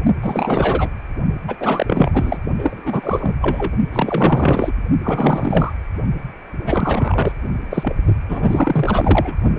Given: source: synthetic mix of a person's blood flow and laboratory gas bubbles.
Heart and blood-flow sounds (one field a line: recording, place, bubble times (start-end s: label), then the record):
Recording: Doppler ultrasound of blood flow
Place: precordium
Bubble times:
0.22-0.90 s: bubbles
1.47-1.56 s: bubbles
1.60-2.38 s: bubbles
2.58-3.37 s: bubbles
3.41-3.73 s: bubbles
3.93-4.73 s: bubbles
5.04-5.73 s: bubbles
6.62-7.32 s: bubbles
7.70-7.96 s: bubbles
8.29-9.35 s: bubbles
From the record:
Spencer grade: 4 (maximum detectable bubble signal sounding continuously throughout systole and diastole of every cardiac period, and overriding the amplitude of the normal cardiac signals)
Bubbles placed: only in the low amplitude regions of the cardiac cycle